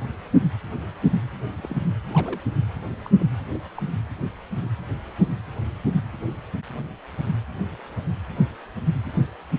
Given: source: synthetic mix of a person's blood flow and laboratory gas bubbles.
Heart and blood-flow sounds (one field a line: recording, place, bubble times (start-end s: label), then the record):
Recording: Doppler ultrasound of blood flow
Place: precordium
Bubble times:
1.56-1.75 s: bubbles
2.08-2.41 s: bubbles
3.04-3.10 s: bubbles
3.19-3.25 s: bubbles
3.48-3.56 s: bubbles
3.75-3.83 s: bubbles
From the record:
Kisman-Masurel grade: 121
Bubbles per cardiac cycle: 1 to 2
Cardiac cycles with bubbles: 10 to 50%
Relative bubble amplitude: barely perceptible (0.100 to 0.250)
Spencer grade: 2 (many but less than half of the cardiac periods contain bubble signals, singularly or in groups)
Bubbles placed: anywhere in the cardiac cycle